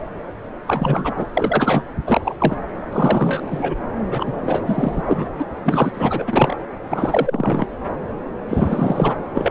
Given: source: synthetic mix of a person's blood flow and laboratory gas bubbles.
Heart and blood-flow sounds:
Doppler ultrasound of blood flow; subclavian vein
0.66-1.26 s: bubbles
1.33-1.83 s: bubbles
2.06-2.34 s: bubbles
2.38-2.57 s: bubbles
2.92-3.74 s: bubbles
4.03-4.62 s: bubbles
4.65-5.01 s: bubbles
5.05-5.27 s: bubbles
5.38-5.46 s: bubbles
5.64-5.91 s: bubbles
5.93-6.57 s: bubbles
6.90-7.66 s: bubbles
8.49-9.15 s: bubbles
9.34-9.51 s: bubbles
From the record:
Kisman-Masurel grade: 333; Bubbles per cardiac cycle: rolling drumbeat, 9 or more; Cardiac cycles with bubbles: 50 to 99%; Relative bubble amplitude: loud (0.450 to 0.775); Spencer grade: 3 (all of the cardiac periods contain showers or single bubble signals, but not dominating or overriding the cardiac motion signals); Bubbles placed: anywhere in the cardiac cycle

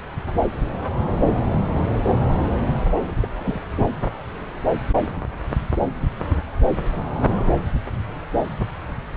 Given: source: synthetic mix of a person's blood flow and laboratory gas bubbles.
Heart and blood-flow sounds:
Doppler ultrasound of blood flow; subclavian vein
3.20-3.29 s: bubbles
3.35-3.61 s: bubbles
From the record:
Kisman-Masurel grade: 111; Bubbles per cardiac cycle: 1 to 2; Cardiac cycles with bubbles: 1 to 10%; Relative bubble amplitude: barely perceptible (0.100 to 0.250); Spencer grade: 1 (occasional bubble signal discernible with the cardiac motion signal, with majority of cardiac periods free of bubbles); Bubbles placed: anywhere in the cardiac cycle

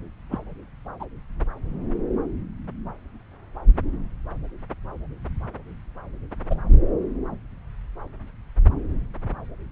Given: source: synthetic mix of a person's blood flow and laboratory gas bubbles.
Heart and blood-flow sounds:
Doppler ultrasound of blood flow; subclavian vein
0.31-0.38 s: bubbles
0.99-1.05 s: bubbles
6.50-6.55 s: bubbles
From the record:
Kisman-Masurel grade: 121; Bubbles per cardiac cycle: 1 to 2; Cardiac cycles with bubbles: 10 to 50%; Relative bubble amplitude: barely perceptible (0.100 to 0.250); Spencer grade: 2 (many but less than half of the cardiac periods contain bubble signals, singularly or in groups); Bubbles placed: anywhere in the cardiac cycle

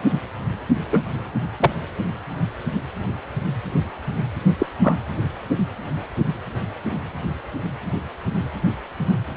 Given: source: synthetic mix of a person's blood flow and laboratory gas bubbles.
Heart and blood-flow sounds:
Doppler ultrasound of blood flow; precordium
0.93-1.01 s: bubbles
1.60-1.71 s: bubbles
4.59-4.66 s: bubbles
4.84-4.99 s: bubbles
From the record:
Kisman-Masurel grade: 123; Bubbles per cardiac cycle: 1 to 2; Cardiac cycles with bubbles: 10 to 50%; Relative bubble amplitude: loud (0.450 to 0.775); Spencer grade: 2 (many but less than half of the cardiac periods contain bubble signals, singularly or in groups); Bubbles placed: only in the low amplitude regions of the cardiac cycle

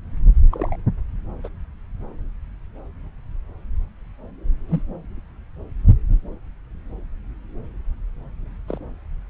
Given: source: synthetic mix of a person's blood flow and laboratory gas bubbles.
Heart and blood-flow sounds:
Doppler ultrasound of blood flow; subclavian vein
0.51-0.76 s: bubbles
1.44-1.49 s: bubbles
4.69-4.81 s: bubbles
8.68-8.78 s: bubbles
From the record:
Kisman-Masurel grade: 121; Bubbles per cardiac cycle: 1 to 2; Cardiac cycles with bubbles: 10 to 50%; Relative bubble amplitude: barely perceptible (0.100 to 0.250); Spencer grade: 2 (many but less than half of the cardiac periods contain bubble signals, singularly or in groups); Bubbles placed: anywhere in the cardiac cycle

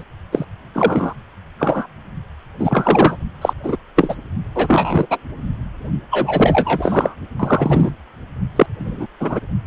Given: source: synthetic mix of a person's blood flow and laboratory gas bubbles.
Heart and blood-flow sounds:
Doppler ultrasound of blood flow; precordium
0.00-0.03 s: bubbles
0.32-0.45 s: bubbles
0.73-1.14 s: bubbles
1.59-1.86 s: bubbles
2.59-3.17 s: bubbles
3.41-3.54 s: bubbles
3.62-3.76 s: bubbles
3.96-4.15 s: bubbles
4.55-5.07 s: bubbles
5.11-5.17 s: bubbles
6.11-7.15 s: bubbles
7.40-7.91 s: bubbles
8.56-8.66 s: bubbles
8.79-9.06 s: bubbles
9.20-9.40 s: bubbles
From the record:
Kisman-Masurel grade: 243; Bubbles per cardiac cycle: several, 3 to 8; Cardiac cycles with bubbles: 100%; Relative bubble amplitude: loud (0.450 to 0.775); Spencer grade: 3 (all of the cardiac periods contain showers or single bubble signals, but not dominating or overriding the cardiac motion signals); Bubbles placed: only in the low amplitude regions of the cardiac cycle

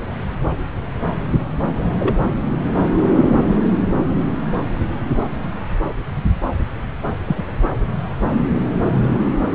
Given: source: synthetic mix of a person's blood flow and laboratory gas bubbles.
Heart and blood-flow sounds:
Doppler ultrasound of blood flow; subclavian vein
2.00-2.15 s: bubbles
7.25-7.43 s: bubbles
From the record:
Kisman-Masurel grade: 122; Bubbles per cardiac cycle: 1 to 2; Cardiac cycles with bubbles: 10 to 50%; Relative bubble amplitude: moderate (0.250 to 0.450); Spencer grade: 2 (many but less than half of the cardiac periods contain bubble signals, singularly or in groups); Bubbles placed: anywhere in the cardiac cycle

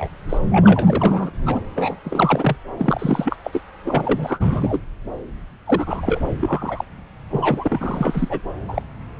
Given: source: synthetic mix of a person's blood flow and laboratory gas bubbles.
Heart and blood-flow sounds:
Doppler ultrasound of blood flow; subclavian vein
0.00-0.08 s: bubbles
0.29-0.38 s: bubbles
0.51-1.30 s: bubbles
1.45-1.60 s: bubbles
1.75-1.97 s: bubbles
2.04-2.56 s: bubbles
2.77-3.36 s: bubbles
3.44-3.62 s: bubbles
3.84-4.80 s: bubbles
5.66-6.20 s: bubbles
6.40-6.84 s: bubbles
7.30-8.40 s: bubbles
8.68-8.82 s: bubbles
From the record:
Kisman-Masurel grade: 342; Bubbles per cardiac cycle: rolling drumbeat, 9 or more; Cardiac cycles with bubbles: 100%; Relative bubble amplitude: moderate (0.250 to 0.450); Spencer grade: 3 (all of the cardiac periods contain showers or single bubble signals, but not dominating or overriding the cardiac motion signals); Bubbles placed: anywhere in the cardiac cycle

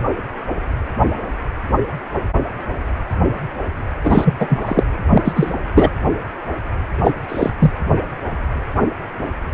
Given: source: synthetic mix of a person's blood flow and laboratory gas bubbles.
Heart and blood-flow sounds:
Doppler ultrasound of blood flow; precordium
4.04-4.34 s: bubbles
4.39-4.59 s: bubbles
4.62-4.83 s: bubbles
5.09-5.22 s: bubbles
5.25-5.52 s: bubbles
5.75-5.90 s: bubbles
7.04-7.13 s: bubbles
7.29-7.50 s: bubbles
7.59-7.71 s: bubbles
From the record:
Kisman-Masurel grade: 223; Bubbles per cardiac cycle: several, 3 to 8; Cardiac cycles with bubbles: 10 to 50%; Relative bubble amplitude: loud (0.450 to 0.775); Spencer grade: 2 (many but less than half of the cardiac periods contain bubble signals, singularly or in groups); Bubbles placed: anywhere in the cardiac cycle

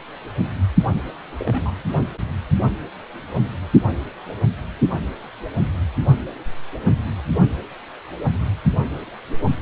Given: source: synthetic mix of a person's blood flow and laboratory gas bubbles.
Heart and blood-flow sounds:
Doppler ultrasound of blood flow; precordium
1.39-1.71 s: bubbles
From the record:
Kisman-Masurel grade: 112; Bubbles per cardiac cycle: 1 to 2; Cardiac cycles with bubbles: 1 to 10%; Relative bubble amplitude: moderate (0.250 to 0.450); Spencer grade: 1 (occasional bubble signal discernible with the cardiac motion signal, with majority of cardiac periods free of bubbles); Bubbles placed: only in the low amplitude regions of the cardiac cycle

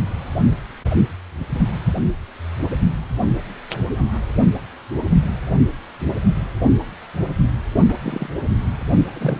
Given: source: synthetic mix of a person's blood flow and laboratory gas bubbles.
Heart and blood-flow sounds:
Doppler ultrasound of blood flow; precordium
7.88-7.94 s: bubbles
8.03-8.28 s: bubbles
9.15-9.40 s: bubbles
From the record:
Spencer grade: 1 (occasional bubble signal discernible with the cardiac motion signal, with majority of cardiac periods free of bubbles); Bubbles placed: only in the low amplitude regions of the cardiac cycle

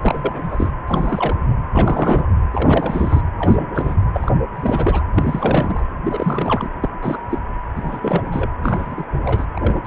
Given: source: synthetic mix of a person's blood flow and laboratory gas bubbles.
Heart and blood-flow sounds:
Doppler ultrasound of blood flow; precordium
0.01-0.72 s: bubbles
0.88-1.56 s: bubbles
1.71-2.28 s: bubbles
2.52-3.21 s: bubbles
3.38-3.96 s: bubbles
4.13-4.32 s: bubbles
4.54-5.05 s: bubbles
5.14-5.86 s: bubbles
6.05-6.70 s: bubbles
6.81-6.89 s: bubbles
7.02-7.18 s: bubbles
7.29-7.38 s: bubbles
7.75-8.49 s: bubbles
8.62-9.05 s: bubbles
9.12-9.49 s: bubbles
9.53-9.81 s: bubbles
9.84-9.87 s: bubbles
From the record:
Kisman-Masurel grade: 332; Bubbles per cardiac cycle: rolling drumbeat, 9 or more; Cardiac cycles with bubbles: 50 to 99%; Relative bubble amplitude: moderate (0.250 to 0.450); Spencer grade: 3 (all of the cardiac periods contain showers or single bubble signals, but not dominating or overriding the cardiac motion signals); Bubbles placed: anywhere in the cardiac cycle

